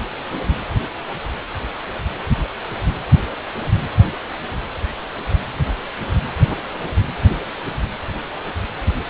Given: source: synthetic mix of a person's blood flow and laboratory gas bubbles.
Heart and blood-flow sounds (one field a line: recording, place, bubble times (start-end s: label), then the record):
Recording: Doppler ultrasound of blood flow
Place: precordium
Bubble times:
no bubbles
From the record:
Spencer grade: 0 (complete lack of bubble signals)